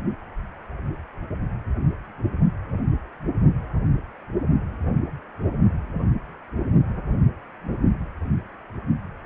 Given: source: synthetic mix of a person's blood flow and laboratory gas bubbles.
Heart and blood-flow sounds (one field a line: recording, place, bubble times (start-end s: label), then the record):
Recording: Doppler ultrasound of blood flow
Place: precordium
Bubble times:
no bubbles
From the record:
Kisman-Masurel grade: 000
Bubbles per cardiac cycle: 0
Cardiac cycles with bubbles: 0%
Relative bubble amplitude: no bubbles discernible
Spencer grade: 0 (complete lack of bubble signals)